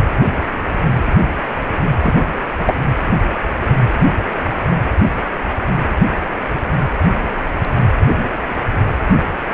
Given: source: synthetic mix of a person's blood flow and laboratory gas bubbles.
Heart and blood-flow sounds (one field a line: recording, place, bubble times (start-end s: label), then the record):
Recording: Doppler ultrasound of blood flow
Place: precordium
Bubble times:
2.00-2.14 s: bubbles
2.67-2.74 s: bubbles
From the record:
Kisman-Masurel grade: 112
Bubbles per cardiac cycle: 1 to 2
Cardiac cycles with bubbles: 1 to 10%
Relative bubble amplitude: moderate (0.250 to 0.450)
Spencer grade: 1 (occasional bubble signal discernible with the cardiac motion signal, with majority of cardiac periods free of bubbles)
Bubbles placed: anywhere in the cardiac cycle